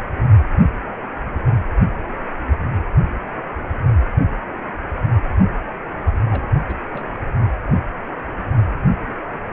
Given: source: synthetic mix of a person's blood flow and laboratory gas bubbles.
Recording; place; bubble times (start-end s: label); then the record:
Doppler ultrasound of blood flow; precordium
6.20-6.48 s: bubbles
6.69-6.74 s: bubbles
6.85-7.07 s: bubbles
7.16-7.19 s: bubbles
From the record:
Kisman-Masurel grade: 211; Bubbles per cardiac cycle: several, 3 to 8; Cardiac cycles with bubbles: 1 to 10%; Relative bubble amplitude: barely perceptible (0.100 to 0.250); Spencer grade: 1 (occasional bubble signal discernible with the cardiac motion signal, with majority of cardiac periods free of bubbles); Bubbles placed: only in the low amplitude regions of the cardiac cycle